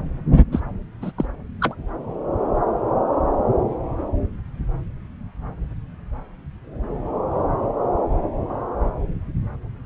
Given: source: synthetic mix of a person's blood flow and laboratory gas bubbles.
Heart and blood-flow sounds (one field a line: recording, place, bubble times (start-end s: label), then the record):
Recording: Doppler ultrasound of blood flow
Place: subclavian vein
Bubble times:
0.52-0.60 s: bubbles
1.01-1.11 s: bubbles
1.18-1.25 s: bubbles
1.61-1.75 s: bubbles
From the record:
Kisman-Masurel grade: 212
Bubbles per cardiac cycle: several, 3 to 8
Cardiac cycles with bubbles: 1 to 10%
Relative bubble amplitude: moderate (0.250 to 0.450)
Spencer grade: 1 (occasional bubble signal discernible with the cardiac motion signal, with majority of cardiac periods free of bubbles)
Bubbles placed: anywhere in the cardiac cycle